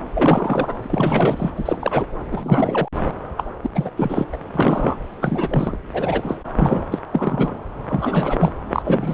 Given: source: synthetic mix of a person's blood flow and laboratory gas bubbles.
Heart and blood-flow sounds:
Doppler ultrasound of blood flow; subclavian vein
0.14-0.75 s: bubbles
0.83-1.52 s: bubbles
1.56-2.05 s: bubbles
2.31-2.88 s: bubbles
3.36-3.45 s: bubbles
3.63-3.70 s: bubbles
3.75-3.90 s: bubbles
3.96-4.25 s: bubbles
4.32-4.37 s: bubbles
4.54-4.96 s: bubbles
5.21-5.77 s: bubbles
5.93-6.37 s: bubbles
6.55-6.85 s: bubbles
6.92-7.00 s: bubbles
7.12-7.57 s: bubbles
7.88-8.52 s: bubbles
8.70-9.14 s: bubbles
From the record:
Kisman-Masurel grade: 342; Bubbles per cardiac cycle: rolling drumbeat, 9 or more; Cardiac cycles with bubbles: 100%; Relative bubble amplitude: moderate (0.250 to 0.450); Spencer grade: 3 (all of the cardiac periods contain showers or single bubble signals, but not dominating or overriding the cardiac motion signals); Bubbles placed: anywhere in the cardiac cycle

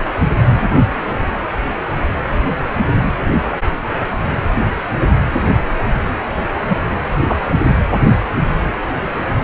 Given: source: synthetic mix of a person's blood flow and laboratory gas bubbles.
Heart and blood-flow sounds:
Doppler ultrasound of blood flow; precordium
6.68-6.79 s: bubbles
7.25-7.40 s: bubbles
From the record:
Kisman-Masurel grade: 112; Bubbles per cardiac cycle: 1 to 2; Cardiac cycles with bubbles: 1 to 10%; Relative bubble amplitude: moderate (0.250 to 0.450); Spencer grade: 1 (occasional bubble signal discernible with the cardiac motion signal, with majority of cardiac periods free of bubbles); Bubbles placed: anywhere in the cardiac cycle

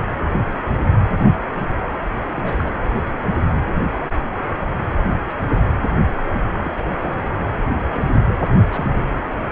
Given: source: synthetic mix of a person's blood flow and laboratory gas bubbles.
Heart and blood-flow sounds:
Doppler ultrasound of blood flow; precordium
2.32-2.71 s: bubbles
5.10-5.16 s: bubbles
5.29-5.33 s: bubbles
5.49-5.77 s: bubbles
6.25-6.41 s: bubbles
6.58-6.92 s: bubbles
6.99-7.21 s: bubbles
7.54-7.62 s: bubbles
7.81-7.83 s: bubbles
7.86-8.39 s: bubbles
8.71-9.14 s: bubbles
From the record:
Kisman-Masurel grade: 221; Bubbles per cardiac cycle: several, 3 to 8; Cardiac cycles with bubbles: 10 to 50%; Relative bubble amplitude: barely perceptible (0.100 to 0.250); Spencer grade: 2 (many but less than half of the cardiac periods contain bubble signals, singularly or in groups); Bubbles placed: anywhere in the cardiac cycle

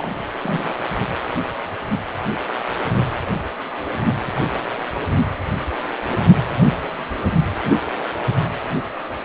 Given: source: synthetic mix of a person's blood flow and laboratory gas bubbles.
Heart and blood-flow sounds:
Doppler ultrasound of blood flow; precordium
0.00-0.15 s: bubbles
0.43-0.75 s: bubbles
From the record:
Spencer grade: 1 (occasional bubble signal discernible with the cardiac motion signal, with majority of cardiac periods free of bubbles); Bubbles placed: anywhere in the cardiac cycle

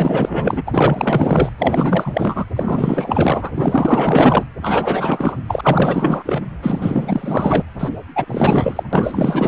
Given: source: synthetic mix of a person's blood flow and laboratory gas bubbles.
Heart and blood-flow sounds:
Doppler ultrasound of blood flow; precordium
0.00-0.61 s: bubbles
0.66-1.50 s: bubbles
1.58-2.45 s: bubbles
2.56-3.52 s: bubbles
3.54-4.44 s: bubbles
4.62-5.36 s: bubbles
5.47-6.42 s: bubbles
6.62-7.63 s: bubbles
7.79-7.89 s: bubbles
8.15-8.83 s: bubbles
8.92-9.48 s: bubbles
From the record:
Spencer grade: 4 (maximum detectable bubble signal sounding continuously throughout systole and diastole of every cardiac period, and overriding the amplitude of the normal cardiac signals); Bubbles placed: anywhere in the cardiac cycle

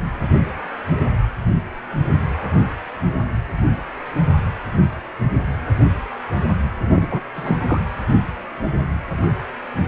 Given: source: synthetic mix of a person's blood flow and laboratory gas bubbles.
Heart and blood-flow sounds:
Doppler ultrasound of blood flow; precordium
6.87-7.08 s: bubbles
7.11-7.20 s: bubbles
7.35-7.80 s: bubbles
From the record:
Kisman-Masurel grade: 212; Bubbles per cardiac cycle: several, 3 to 8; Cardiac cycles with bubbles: 1 to 10%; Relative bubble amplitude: moderate (0.250 to 0.450); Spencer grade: 1 (occasional bubble signal discernible with the cardiac motion signal, with majority of cardiac periods free of bubbles); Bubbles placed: anywhere in the cardiac cycle

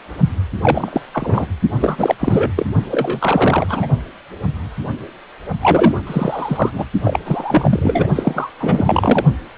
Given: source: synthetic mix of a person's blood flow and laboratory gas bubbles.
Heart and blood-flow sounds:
Doppler ultrasound of blood flow; precordium
0.62-1.00 s: bubbles
1.13-1.47 s: bubbles
1.80-2.15 s: bubbles
2.20-2.52 s: bubbles
2.56-2.67 s: bubbles
2.91-3.87 s: bubbles
5.62-5.96 s: bubbles
6.06-6.70 s: bubbles
6.73-6.85 s: bubbles
7.04-7.19 s: bubbles
7.25-8.09 s: bubbles
8.15-8.52 s: bubbles
8.60-9.25 s: bubbles
From the record:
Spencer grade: 3 (all of the cardiac periods contain showers or single bubble signals, but not dominating or overriding the cardiac motion signals); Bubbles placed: only in the low amplitude regions of the cardiac cycle

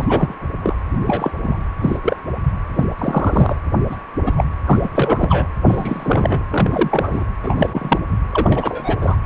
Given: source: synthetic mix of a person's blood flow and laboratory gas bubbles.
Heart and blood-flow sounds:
Doppler ultrasound of blood flow; precordium
0.00-0.34 s: bubbles
0.62-0.76 s: bubbles
1.06-1.31 s: bubbles
1.38-1.64 s: bubbles
1.81-1.98 s: bubbles
2.02-2.17 s: bubbles
2.75-2.84 s: bubbles
2.98-3.56 s: bubbles
3.90-3.97 s: bubbles
4.26-4.33 s: bubbles
4.36-4.45 s: bubbles
4.66-4.89 s: bubbles
4.93-5.48 s: bubbles
5.64-6.43 s: bubbles
6.50-7.24 s: bubbles
7.43-7.99 s: bubbles
8.33-8.98 s: bubbles
9.01-9.16 s: bubbles
From the record:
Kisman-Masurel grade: 243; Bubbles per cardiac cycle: several, 3 to 8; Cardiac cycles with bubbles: 100%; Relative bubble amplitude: loud (0.450 to 0.775); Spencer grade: 3 (all of the cardiac periods contain showers or single bubble signals, but not dominating or overriding the cardiac motion signals); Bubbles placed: anywhere in the cardiac cycle

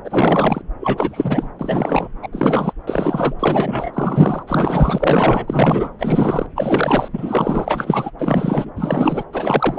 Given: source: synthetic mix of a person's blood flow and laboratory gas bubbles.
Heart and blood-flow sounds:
Doppler ultrasound of blood flow; subclavian vein
0.04-0.61 s: bubbles
0.80-1.49 s: bubbles
1.59-2.08 s: bubbles
2.22-2.29 s: bubbles
2.32-2.73 s: bubbles
2.87-3.35 s: bubbles
3.39-4.43 s: bubbles
4.47-5.90 s: bubbles
5.99-6.46 s: bubbles
6.55-7.08 s: bubbles
7.13-8.11 s: bubbles
8.19-8.70 s: bubbles
8.76-9.23 s: bubbles
9.32-9.79 s: bubbles
From the record:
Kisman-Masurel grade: 343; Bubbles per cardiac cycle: rolling drumbeat, 9 or more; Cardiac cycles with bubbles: 100%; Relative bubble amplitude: loud (0.450 to 0.775); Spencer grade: 3 (all of the cardiac periods contain showers or single bubble signals, but not dominating or overriding the cardiac motion signals); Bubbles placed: anywhere in the cardiac cycle

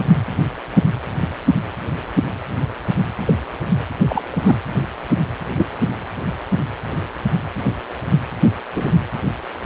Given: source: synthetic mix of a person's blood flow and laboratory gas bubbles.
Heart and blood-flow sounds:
Doppler ultrasound of blood flow; precordium
3.26-3.37 s: bubbles
4.09-4.22 s: bubbles
4.29-4.56 s: bubbles
5.56-5.67 s: bubbles
8.75-8.93 s: bubbles
From the record:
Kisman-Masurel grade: 123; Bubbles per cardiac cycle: 1 to 2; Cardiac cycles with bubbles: 10 to 50%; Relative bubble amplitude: loud (0.450 to 0.775); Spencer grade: 2 (many but less than half of the cardiac periods contain bubble signals, singularly or in groups); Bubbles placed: anywhere in the cardiac cycle

